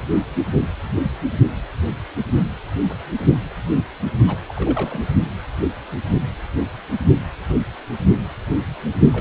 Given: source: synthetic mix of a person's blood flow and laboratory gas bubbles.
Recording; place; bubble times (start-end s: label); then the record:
Doppler ultrasound of blood flow; precordium
4.27-4.38 s: bubbles
4.48-5.00 s: bubbles
9.12-9.21 s: bubbles
From the record:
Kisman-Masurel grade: 221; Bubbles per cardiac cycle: several, 3 to 8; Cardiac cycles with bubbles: 10 to 50%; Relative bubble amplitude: barely perceptible (0.100 to 0.250); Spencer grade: 2 (many but less than half of the cardiac periods contain bubble signals, singularly or in groups); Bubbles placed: only in the low amplitude regions of the cardiac cycle